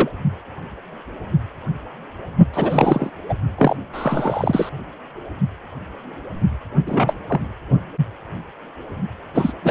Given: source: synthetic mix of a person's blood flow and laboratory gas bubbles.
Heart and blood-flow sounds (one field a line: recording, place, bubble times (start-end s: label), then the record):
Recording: Doppler ultrasound of blood flow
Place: precordium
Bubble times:
0.00-0.08 s: bubbles
2.54-3.10 s: bubbles
3.29-3.34 s: bubbles
3.58-3.76 s: bubbles
3.93-4.69 s: bubbles
6.86-7.17 s: bubbles
7.27-7.40 s: bubbles
9.34-9.53 s: bubbles
9.63-9.71 s: bubbles
From the record:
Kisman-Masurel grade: 232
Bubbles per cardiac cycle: several, 3 to 8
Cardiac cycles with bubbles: 50 to 99%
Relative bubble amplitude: moderate (0.250 to 0.450)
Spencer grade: 3 (all of the cardiac periods contain showers or single bubble signals, but not dominating or overriding the cardiac motion signals)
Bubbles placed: only in the low amplitude regions of the cardiac cycle